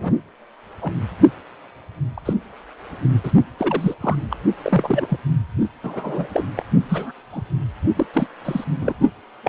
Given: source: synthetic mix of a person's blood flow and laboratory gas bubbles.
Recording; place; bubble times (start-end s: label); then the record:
Doppler ultrasound of blood flow; precordium
0.00-0.12 s: bubbles
0.81-0.92 s: bubbles
2.17-2.21 s: bubbles
2.25-2.33 s: bubbles
3.24-3.32 s: bubbles
3.58-3.95 s: bubbles
4.00-4.16 s: bubbles
4.30-4.37 s: bubbles
4.62-5.19 s: bubbles
5.83-6.27 s: bubbles
6.33-6.44 s: bubbles
6.55-6.66 s: bubbles
6.89-7.12 s: bubbles
7.33-7.42 s: bubbles
7.96-8.06 s: bubbles
8.13-8.27 s: bubbles
8.44-8.64 s: bubbles
8.80-8.92 s: bubbles
9.43-9.49 s: bubbles
From the record:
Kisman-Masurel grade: 242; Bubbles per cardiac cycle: several, 3 to 8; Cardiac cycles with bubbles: 100%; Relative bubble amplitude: moderate (0.250 to 0.450); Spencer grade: 3 (all of the cardiac periods contain showers or single bubble signals, but not dominating or overriding the cardiac motion signals); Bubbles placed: only in the low amplitude regions of the cardiac cycle